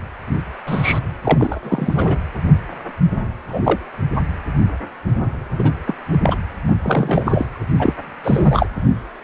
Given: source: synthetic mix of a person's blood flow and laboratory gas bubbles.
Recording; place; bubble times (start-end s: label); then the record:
Doppler ultrasound of blood flow; precordium
0.66-0.99 s: bubbles
1.23-1.60 s: bubbles
1.63-2.18 s: bubbles
3.48-3.61 s: bubbles
3.64-3.79 s: bubbles
5.58-5.72 s: bubbles
5.87-5.95 s: bubbles
6.12-6.18 s: bubbles
6.23-6.37 s: bubbles
6.68-6.75 s: bubbles
6.83-7.46 s: bubbles
7.79-7.93 s: bubbles
8.24-8.66 s: bubbles
From the record:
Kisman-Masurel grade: 233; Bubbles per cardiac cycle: several, 3 to 8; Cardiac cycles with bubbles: 50 to 99%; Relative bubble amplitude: loud (0.450 to 0.775); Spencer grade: 3 (all of the cardiac periods contain showers or single bubble signals, but not dominating or overriding the cardiac motion signals); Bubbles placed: anywhere in the cardiac cycle